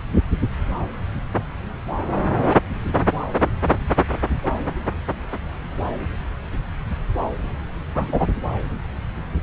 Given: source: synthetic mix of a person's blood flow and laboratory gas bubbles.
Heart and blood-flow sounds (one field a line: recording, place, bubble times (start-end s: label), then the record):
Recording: Doppler ultrasound of blood flow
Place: subclavian vein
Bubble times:
7.95-8.26 s: bubbles
From the record:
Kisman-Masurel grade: 123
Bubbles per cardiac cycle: 1 to 2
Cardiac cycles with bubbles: 10 to 50%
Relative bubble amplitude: loud (0.450 to 0.775)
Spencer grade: 2 (many but less than half of the cardiac periods contain bubble signals, singularly or in groups)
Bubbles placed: anywhere in the cardiac cycle